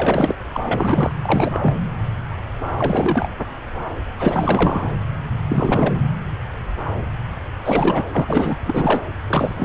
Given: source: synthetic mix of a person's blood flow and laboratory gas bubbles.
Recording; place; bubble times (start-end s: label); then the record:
Doppler ultrasound of blood flow; subclavian vein
0.00-0.35 s: bubbles
0.54-1.15 s: bubbles
1.22-1.75 s: bubbles
2.75-3.32 s: bubbles
4.19-4.90 s: bubbles
5.48-5.97 s: bubbles
7.65-8.03 s: bubbles
8.12-8.56 s: bubbles
8.63-9.00 s: bubbles
9.27-9.65 s: bubbles
From the record:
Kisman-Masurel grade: 333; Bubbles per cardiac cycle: rolling drumbeat, 9 or more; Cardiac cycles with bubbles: 50 to 99%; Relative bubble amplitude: loud (0.450 to 0.775); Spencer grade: 3 (all of the cardiac periods contain showers or single bubble signals, but not dominating or overriding the cardiac motion signals); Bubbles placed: anywhere in the cardiac cycle